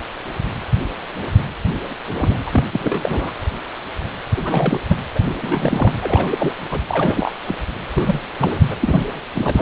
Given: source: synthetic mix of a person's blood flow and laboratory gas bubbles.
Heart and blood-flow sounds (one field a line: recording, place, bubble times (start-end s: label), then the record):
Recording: Doppler ultrasound of blood flow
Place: precordium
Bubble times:
2.19-2.42 s: bubbles
2.46-2.65 s: bubbles
2.73-3.00 s: bubbles
3.03-3.31 s: bubbles
4.37-4.80 s: bubbles
4.89-4.98 s: bubbles
5.15-5.20 s: bubbles
5.26-5.92 s: bubbles
6.01-6.53 s: bubbles
6.71-6.80 s: bubbles
6.89-7.31 s: bubbles
7.45-7.56 s: bubbles
7.96-8.20 s: bubbles
8.38-8.58 s: bubbles
8.71-8.75 s: bubbles
8.80-9.07 s: bubbles
9.34-9.62 s: bubbles
From the record:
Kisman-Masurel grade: 332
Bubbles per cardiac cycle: rolling drumbeat, 9 or more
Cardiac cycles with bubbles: 50 to 99%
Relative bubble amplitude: moderate (0.250 to 0.450)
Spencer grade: 3 (all of the cardiac periods contain showers or single bubble signals, but not dominating or overriding the cardiac motion signals)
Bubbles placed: anywhere in the cardiac cycle